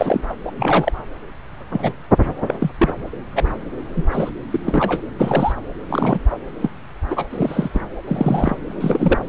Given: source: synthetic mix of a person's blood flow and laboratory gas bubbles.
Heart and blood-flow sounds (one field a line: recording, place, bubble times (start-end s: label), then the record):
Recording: Doppler ultrasound of blood flow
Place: subclavian vein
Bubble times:
0.00-0.21 s: bubbles
0.29-0.35 s: bubbles
0.45-0.51 s: bubbles
0.58-0.92 s: bubbles
1.72-1.93 s: bubbles
2.46-2.54 s: bubbles
2.60-2.71 s: bubbles
2.78-2.93 s: bubbles
3.34-3.53 s: bubbles
3.96-4.03 s: bubbles
4.08-4.29 s: bubbles
4.50-5.02 s: bubbles
5.18-5.52 s: bubbles
5.89-6.19 s: bubbles
6.30-6.37 s: bubbles
6.60-6.70 s: bubbles
7.10-7.27 s: bubbles
7.30-7.70 s: bubbles
7.73-7.81 s: bubbles
8.07-8.57 s: bubbles
8.66-9.20 s: bubbles
From the record:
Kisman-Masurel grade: 242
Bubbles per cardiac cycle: several, 3 to 8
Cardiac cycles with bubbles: 100%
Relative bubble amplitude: moderate (0.250 to 0.450)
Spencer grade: 3 (all of the cardiac periods contain showers or single bubble signals, but not dominating or overriding the cardiac motion signals)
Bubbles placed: anywhere in the cardiac cycle